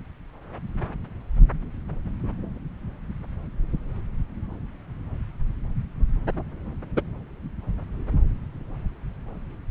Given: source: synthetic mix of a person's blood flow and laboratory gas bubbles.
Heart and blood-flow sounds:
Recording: Doppler ultrasound of blood flow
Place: subclavian vein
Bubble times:
6.96-7.01 s: bubbles
From the record:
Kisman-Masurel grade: 113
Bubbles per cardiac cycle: 1 to 2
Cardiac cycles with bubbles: 1 to 10%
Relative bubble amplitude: loud (0.450 to 0.775)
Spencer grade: 1 (occasional bubble signal discernible with the cardiac motion signal, with majority of cardiac periods free of bubbles)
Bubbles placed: anywhere in the cardiac cycle

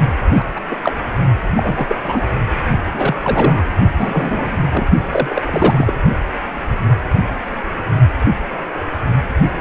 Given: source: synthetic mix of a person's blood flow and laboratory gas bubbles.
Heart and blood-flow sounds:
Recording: Doppler ultrasound of blood flow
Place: precordium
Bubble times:
0.28-0.42 s: bubbles
0.55-0.60 s: bubbles
0.70-0.76 s: bubbles
0.83-0.93 s: bubbles
1.55-1.96 s: bubbles
2.03-2.22 s: bubbles
2.91-3.15 s: bubbles
3.24-3.64 s: bubbles
3.98-4.57 s: bubbles
4.71-4.86 s: bubbles
5.11-5.42 s: bubbles
5.46-5.94 s: bubbles
From the record:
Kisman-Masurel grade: 233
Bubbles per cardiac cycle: several, 3 to 8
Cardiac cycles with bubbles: 50 to 99%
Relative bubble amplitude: loud (0.450 to 0.775)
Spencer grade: 3 (all of the cardiac periods contain showers or single bubble signals, but not dominating or overriding the cardiac motion signals)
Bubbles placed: only in the low amplitude regions of the cardiac cycle

